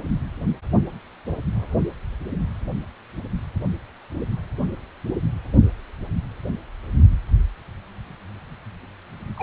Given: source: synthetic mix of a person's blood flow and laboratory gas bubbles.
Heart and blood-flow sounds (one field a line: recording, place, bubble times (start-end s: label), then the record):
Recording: Doppler ultrasound of blood flow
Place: precordium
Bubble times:
9.36-9.43 s: bubbles
From the record:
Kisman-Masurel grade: 212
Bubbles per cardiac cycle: several, 3 to 8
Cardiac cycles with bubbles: 1 to 10%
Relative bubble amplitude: moderate (0.250 to 0.450)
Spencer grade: 1 (occasional bubble signal discernible with the cardiac motion signal, with majority of cardiac periods free of bubbles)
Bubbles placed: only in the low amplitude regions of the cardiac cycle